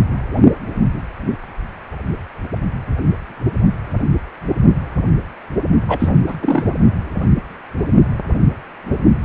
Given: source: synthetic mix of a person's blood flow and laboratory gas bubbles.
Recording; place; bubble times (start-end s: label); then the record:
Doppler ultrasound of blood flow; precordium
5.88-6.10 s: bubbles
6.27-6.35 s: bubbles
6.42-6.64 s: bubbles
From the record:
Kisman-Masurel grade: 223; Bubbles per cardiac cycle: several, 3 to 8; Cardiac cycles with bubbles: 10 to 50%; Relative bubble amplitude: loud (0.450 to 0.775); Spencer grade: 2 (many but less than half of the cardiac periods contain bubble signals, singularly or in groups); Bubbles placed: only in the low amplitude regions of the cardiac cycle